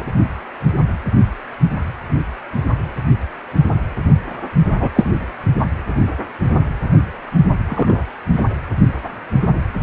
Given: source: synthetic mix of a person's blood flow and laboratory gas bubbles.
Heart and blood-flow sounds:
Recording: Doppler ultrasound of blood flow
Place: precordium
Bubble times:
0.00-0.05 s: bubbles
4.80-4.89 s: bubbles
4.95-5.10 s: bubbles
7.68-8.02 s: bubbles
8.32-8.42 s: bubbles
From the record:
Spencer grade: 2 (many but less than half of the cardiac periods contain bubble signals, singularly or in groups)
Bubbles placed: only in the low amplitude regions of the cardiac cycle

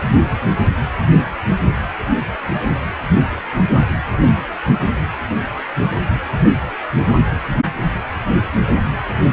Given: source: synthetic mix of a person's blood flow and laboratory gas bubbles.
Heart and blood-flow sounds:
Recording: Doppler ultrasound of blood flow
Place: precordium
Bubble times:
7.54-7.59 s: bubbles
From the record:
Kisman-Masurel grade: 112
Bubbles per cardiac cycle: 1 to 2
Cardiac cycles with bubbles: 1 to 10%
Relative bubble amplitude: moderate (0.250 to 0.450)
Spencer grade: 1 (occasional bubble signal discernible with the cardiac motion signal, with majority of cardiac periods free of bubbles)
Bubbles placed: anywhere in the cardiac cycle

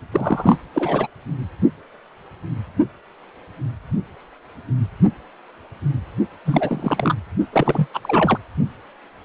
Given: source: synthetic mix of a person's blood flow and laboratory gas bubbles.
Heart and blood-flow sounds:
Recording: Doppler ultrasound of blood flow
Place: precordium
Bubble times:
0.12-0.57 s: bubbles
0.73-1.07 s: bubbles
6.45-7.14 s: bubbles
7.52-7.88 s: bubbles
7.94-8.38 s: bubbles
From the record:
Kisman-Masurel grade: 223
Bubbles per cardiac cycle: several, 3 to 8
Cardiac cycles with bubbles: 10 to 50%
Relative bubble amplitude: loud (0.450 to 0.775)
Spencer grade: 2 (many but less than half of the cardiac periods contain bubble signals, singularly or in groups)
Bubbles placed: only in the low amplitude regions of the cardiac cycle

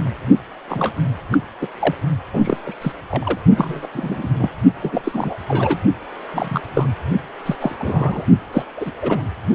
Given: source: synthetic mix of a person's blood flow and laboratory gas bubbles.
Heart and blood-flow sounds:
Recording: Doppler ultrasound of blood flow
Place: precordium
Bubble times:
0.69-0.94 s: bubbles
1.31-1.38 s: bubbles
1.61-1.67 s: bubbles
1.79-1.94 s: bubbles
2.33-2.57 s: bubbles
2.66-2.75 s: bubbles
2.81-2.92 s: bubbles
3.09-3.38 s: bubbles
3.55-3.87 s: bubbles
3.93-4.29 s: bubbles
4.39-4.50 s: bubbles
4.82-5.34 s: bubbles
5.48-5.81 s: bubbles
6.33-6.61 s: bubbles
6.75-6.89 s: bubbles
7.46-7.56 s: bubbles
7.61-7.76 s: bubbles
7.78-8.25 s: bubbles
8.53-8.65 s: bubbles
8.77-8.92 s: bubbles
9.02-9.21 s: bubbles
From the record:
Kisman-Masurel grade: 242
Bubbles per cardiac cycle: several, 3 to 8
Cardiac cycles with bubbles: 100%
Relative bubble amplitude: moderate (0.250 to 0.450)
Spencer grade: 3 (all of the cardiac periods contain showers or single bubble signals, but not dominating or overriding the cardiac motion signals)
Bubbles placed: only in the low amplitude regions of the cardiac cycle

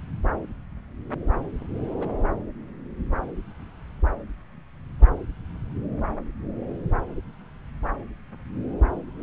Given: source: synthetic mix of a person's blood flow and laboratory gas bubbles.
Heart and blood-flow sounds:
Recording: Doppler ultrasound of blood flow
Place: subclavian vein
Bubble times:
2.00-2.10 s: bubbles
From the record:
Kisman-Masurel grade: 111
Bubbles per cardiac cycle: 1 to 2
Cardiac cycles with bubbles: 1 to 10%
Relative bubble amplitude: barely perceptible (0.100 to 0.250)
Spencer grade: 1 (occasional bubble signal discernible with the cardiac motion signal, with majority of cardiac periods free of bubbles)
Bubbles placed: anywhere in the cardiac cycle

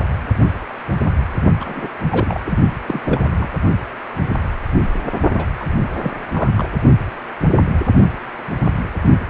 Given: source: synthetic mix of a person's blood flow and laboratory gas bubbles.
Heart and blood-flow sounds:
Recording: Doppler ultrasound of blood flow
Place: precordium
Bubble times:
1.60-1.90 s: bubbles
2.10-2.41 s: bubbles
2.45-2.58 s: bubbles
2.88-3.00 s: bubbles
3.04-3.48 s: bubbles
5.32-5.46 s: bubbles
5.60-5.66 s: bubbles
6.03-6.12 s: bubbles
6.34-6.50 s: bubbles
6.57-6.70 s: bubbles
From the record:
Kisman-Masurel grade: 222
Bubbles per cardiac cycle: several, 3 to 8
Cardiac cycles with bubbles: 10 to 50%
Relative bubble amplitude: moderate (0.250 to 0.450)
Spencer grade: 2 (many but less than half of the cardiac periods contain bubble signals, singularly or in groups)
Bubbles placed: only in the low amplitude regions of the cardiac cycle

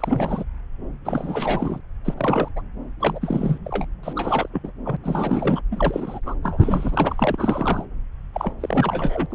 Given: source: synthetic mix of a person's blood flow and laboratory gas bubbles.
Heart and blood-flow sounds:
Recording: Doppler ultrasound of blood flow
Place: subclavian vein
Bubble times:
0.00-0.44 s: bubbles
1.04-1.81 s: bubbles
2.04-2.14 s: bubbles
2.17-2.51 s: bubbles
2.56-2.61 s: bubbles
3.00-3.58 s: bubbles
3.65-3.85 s: bubbles
4.03-4.13 s: bubbles
4.15-4.48 s: bubbles
4.53-4.60 s: bubbles
4.63-4.70 s: bubbles
4.85-4.97 s: bubbles
5.04-5.60 s: bubbles
5.71-6.19 s: bubbles
6.26-6.34 s: bubbles
6.43-7.86 s: bubbles
8.34-8.53 s: bubbles
8.60-9.26 s: bubbles
9.30-9.35 s: bubbles
From the record:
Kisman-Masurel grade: 342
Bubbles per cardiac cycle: rolling drumbeat, 9 or more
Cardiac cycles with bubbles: 100%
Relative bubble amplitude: moderate (0.250 to 0.450)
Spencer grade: 3 (all of the cardiac periods contain showers or single bubble signals, but not dominating or overriding the cardiac motion signals)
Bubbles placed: anywhere in the cardiac cycle

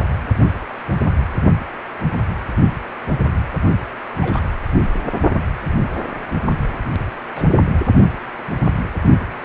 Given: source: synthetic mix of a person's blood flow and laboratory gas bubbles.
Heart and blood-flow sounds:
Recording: Doppler ultrasound of blood flow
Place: precordium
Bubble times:
4.17-4.41 s: bubbles
7.35-7.43 s: bubbles
9.19-9.23 s: bubbles
From the record:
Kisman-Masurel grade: 121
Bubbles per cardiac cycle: 1 to 2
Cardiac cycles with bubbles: 10 to 50%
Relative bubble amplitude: barely perceptible (0.100 to 0.250)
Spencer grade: 2 (many but less than half of the cardiac periods contain bubble signals, singularly or in groups)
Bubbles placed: only in the low amplitude regions of the cardiac cycle

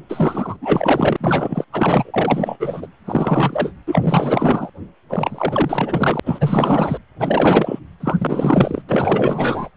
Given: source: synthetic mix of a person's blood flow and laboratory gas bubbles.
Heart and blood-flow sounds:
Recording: Doppler ultrasound of blood flow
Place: precordium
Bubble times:
0.09-0.56 s: bubbles
0.61-1.17 s: bubbles
1.20-1.65 s: bubbles
1.73-2.87 s: bubbles
3.05-3.72 s: bubbles
3.87-4.70 s: bubbles
5.09-6.20 s: bubbles
6.25-6.98 s: bubbles
7.19-7.79 s: bubbles
8.00-8.82 s: bubbles
8.88-9.69 s: bubbles
From the record:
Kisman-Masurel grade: 444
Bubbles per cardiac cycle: continuous sound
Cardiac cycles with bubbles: 100%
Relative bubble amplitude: maximal (0.775 to 0.999)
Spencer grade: 4 (maximum detectable bubble signal sounding continuously throughout systole and diastole of every cardiac period, and overriding the amplitude of the normal cardiac signals)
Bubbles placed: anywhere in the cardiac cycle

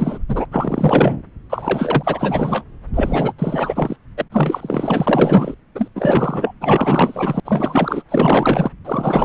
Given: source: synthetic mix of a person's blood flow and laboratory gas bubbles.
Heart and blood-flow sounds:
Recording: Doppler ultrasound of blood flow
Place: subclavian vein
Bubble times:
0.00-0.18 s: bubbles
0.28-0.46 s: bubbles
0.50-1.22 s: bubbles
1.50-2.64 s: bubbles
2.94-3.33 s: bubbles
3.38-3.96 s: bubbles
4.17-4.25 s: bubbles
4.32-5.54 s: bubbles
5.75-5.88 s: bubbles
5.95-6.54 s: bubbles
6.61-7.40 s: bubbles
7.45-8.03 s: bubbles
8.08-8.71 s: bubbles
8.84-9.25 s: bubbles
From the record:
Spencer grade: 4 (maximum detectable bubble signal sounding continuously throughout systole and diastole of every cardiac period, and overriding the amplitude of the normal cardiac signals)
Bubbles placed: anywhere in the cardiac cycle

